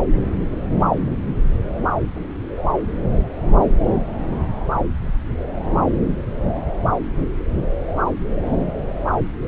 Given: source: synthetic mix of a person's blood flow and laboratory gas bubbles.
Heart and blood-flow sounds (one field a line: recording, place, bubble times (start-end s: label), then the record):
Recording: Doppler ultrasound of blood flow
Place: subclavian vein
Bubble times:
no bubbles
From the record:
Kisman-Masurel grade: 000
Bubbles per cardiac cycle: 0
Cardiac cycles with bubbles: 0%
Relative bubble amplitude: no bubbles discernible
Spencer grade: 0 (complete lack of bubble signals)